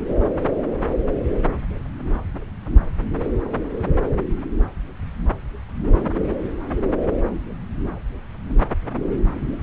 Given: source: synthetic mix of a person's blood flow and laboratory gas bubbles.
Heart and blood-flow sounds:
Doppler ultrasound of blood flow; subclavian vein
5.81-6.02 s: bubbles
6.08-6.12 s: bubbles
From the record:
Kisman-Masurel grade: 211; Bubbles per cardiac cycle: several, 3 to 8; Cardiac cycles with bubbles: 1 to 10%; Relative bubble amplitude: barely perceptible (0.100 to 0.250); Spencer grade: 1 (occasional bubble signal discernible with the cardiac motion signal, with majority of cardiac periods free of bubbles); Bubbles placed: anywhere in the cardiac cycle

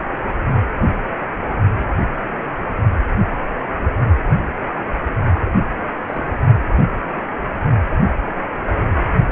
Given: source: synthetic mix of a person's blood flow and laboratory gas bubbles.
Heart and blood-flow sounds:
Doppler ultrasound of blood flow; precordium
6.07-6.46 s: bubbles
From the record:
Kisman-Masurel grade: 111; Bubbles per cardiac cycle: 1 to 2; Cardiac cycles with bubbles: 1 to 10%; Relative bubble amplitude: barely perceptible (0.100 to 0.250); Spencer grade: 1 (occasional bubble signal discernible with the cardiac motion signal, with majority of cardiac periods free of bubbles); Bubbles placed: only in the low amplitude regions of the cardiac cycle

